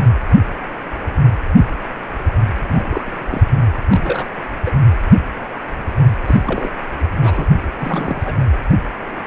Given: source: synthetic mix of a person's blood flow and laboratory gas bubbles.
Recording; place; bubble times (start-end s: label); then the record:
Doppler ultrasound of blood flow; precordium
2.68-2.83 s: bubbles
2.89-3.43 s: bubbles
3.88-4.26 s: bubbles
4.65-4.71 s: bubbles
6.25-6.44 s: bubbles
6.46-6.73 s: bubbles
7.21-7.46 s: bubbles
7.77-8.22 s: bubbles
8.25-8.33 s: bubbles
From the record:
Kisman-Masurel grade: 222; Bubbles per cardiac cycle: several, 3 to 8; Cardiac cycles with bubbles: 10 to 50%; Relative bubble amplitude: moderate (0.250 to 0.450); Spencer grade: 2 (many but less than half of the cardiac periods contain bubble signals, singularly or in groups); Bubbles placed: anywhere in the cardiac cycle